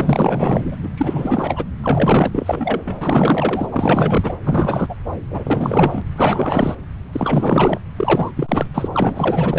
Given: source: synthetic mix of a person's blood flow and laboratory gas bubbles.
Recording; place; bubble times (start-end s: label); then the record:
Doppler ultrasound of blood flow; subclavian vein
0.00-0.76 s: bubbles
0.83-0.89 s: bubbles
0.97-1.65 s: bubbles
1.82-3.69 s: bubbles
3.71-4.37 s: bubbles
4.44-4.95 s: bubbles
5.31-6.02 s: bubbles
6.16-6.75 s: bubbles
7.12-7.81 s: bubbles
7.96-8.31 s: bubbles
8.36-8.66 s: bubbles
8.74-8.88 s: bubbles
8.94-9.59 s: bubbles
From the record:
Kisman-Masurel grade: 444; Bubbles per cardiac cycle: continuous sound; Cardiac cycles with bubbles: 100%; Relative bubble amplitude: maximal (0.775 to 0.999); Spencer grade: 4 (maximum detectable bubble signal sounding continuously throughout systole and diastole of every cardiac period, and overriding the amplitude of the normal cardiac signals); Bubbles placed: anywhere in the cardiac cycle